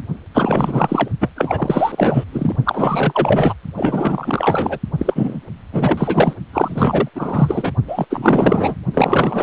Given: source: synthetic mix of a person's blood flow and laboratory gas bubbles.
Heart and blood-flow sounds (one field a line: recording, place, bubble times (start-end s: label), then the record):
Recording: Doppler ultrasound of blood flow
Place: precordium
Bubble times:
0.34-1.08 s: bubbles
1.21-1.30 s: bubbles
1.35-2.24 s: bubbles
2.32-2.56 s: bubbles
2.65-3.53 s: bubbles
3.76-4.79 s: bubbles
4.97-5.40 s: bubbles
5.72-6.36 s: bubbles
6.53-7.09 s: bubbles
7.14-7.72 s: bubbles
7.87-8.05 s: bubbles
8.10-8.74 s: bubbles
8.93-9.43 s: bubbles
From the record:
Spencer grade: 4 (maximum detectable bubble signal sounding continuously throughout systole and diastole of every cardiac period, and overriding the amplitude of the normal cardiac signals)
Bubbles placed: only in the low amplitude regions of the cardiac cycle